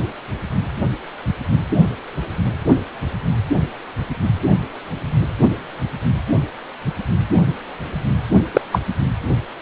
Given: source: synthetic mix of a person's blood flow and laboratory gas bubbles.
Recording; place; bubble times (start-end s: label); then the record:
Doppler ultrasound of blood flow; precordium
8.53-8.61 s: bubbles
8.71-8.80 s: bubbles
From the record:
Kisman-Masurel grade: 113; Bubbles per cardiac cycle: 1 to 2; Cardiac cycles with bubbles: 1 to 10%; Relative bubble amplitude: loud (0.450 to 0.775); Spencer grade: 1 (occasional bubble signal discernible with the cardiac motion signal, with majority of cardiac periods free of bubbles); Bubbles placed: only in the low amplitude regions of the cardiac cycle